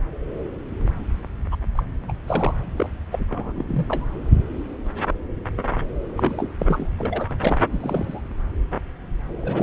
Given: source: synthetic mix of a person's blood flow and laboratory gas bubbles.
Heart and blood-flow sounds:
Doppler ultrasound of blood flow; subclavian vein
1.51-1.56 s: bubbles
1.75-1.83 s: bubbles
2.08-2.12 s: bubbles
2.27-2.54 s: bubbles
2.76-2.89 s: bubbles
3.12-3.25 s: bubbles
3.29-4.06 s: bubbles
6.17-6.51 s: bubbles
6.59-6.89 s: bubbles
6.98-7.60 s: bubbles
7.71-8.21 s: bubbles
9.40-9.62 s: bubbles
From the record:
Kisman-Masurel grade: 232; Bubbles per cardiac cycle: several, 3 to 8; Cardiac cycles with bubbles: 50 to 99%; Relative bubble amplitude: moderate (0.250 to 0.450); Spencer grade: 3 (all of the cardiac periods contain showers or single bubble signals, but not dominating or overriding the cardiac motion signals); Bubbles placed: anywhere in the cardiac cycle

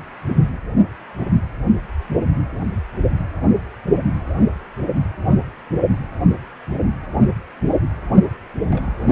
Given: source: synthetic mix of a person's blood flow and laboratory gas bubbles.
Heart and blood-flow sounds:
Doppler ultrasound of blood flow; precordium
8.69-8.96 s: bubbles
From the record:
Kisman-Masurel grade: 211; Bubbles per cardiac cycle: several, 3 to 8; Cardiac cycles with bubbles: 1 to 10%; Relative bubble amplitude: barely perceptible (0.100 to 0.250); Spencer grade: 1 (occasional bubble signal discernible with the cardiac motion signal, with majority of cardiac periods free of bubbles); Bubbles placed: only in the low amplitude regions of the cardiac cycle

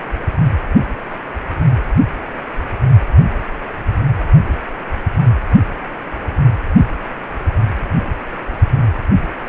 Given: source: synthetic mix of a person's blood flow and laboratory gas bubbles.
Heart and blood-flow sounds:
Doppler ultrasound of blood flow; precordium
no bubbles
From the record:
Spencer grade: 0 (complete lack of bubble signals)

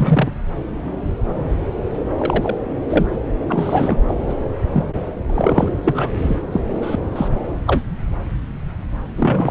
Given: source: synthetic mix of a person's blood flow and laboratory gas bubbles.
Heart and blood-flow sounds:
Doppler ultrasound of blood flow; subclavian vein
0.00-0.31 s: bubbles
1.98-2.03 s: bubbles
2.18-2.55 s: bubbles
2.90-3.06 s: bubbles
3.49-3.96 s: bubbles
4.08-4.15 s: bubbles
4.29-4.34 s: bubbles
4.73-4.84 s: bubbles
5.29-5.69 s: bubbles
5.83-6.10 s: bubbles
6.17-6.39 s: bubbles
6.52-6.63 s: bubbles
6.82-6.96 s: bubbles
7.16-7.28 s: bubbles
7.67-7.82 s: bubbles
9.15-9.51 s: bubbles
From the record:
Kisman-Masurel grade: 233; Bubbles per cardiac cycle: several, 3 to 8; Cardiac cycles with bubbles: 50 to 99%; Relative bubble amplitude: loud (0.450 to 0.775); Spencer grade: 3 (all of the cardiac periods contain showers or single bubble signals, but not dominating or overriding the cardiac motion signals); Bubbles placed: anywhere in the cardiac cycle

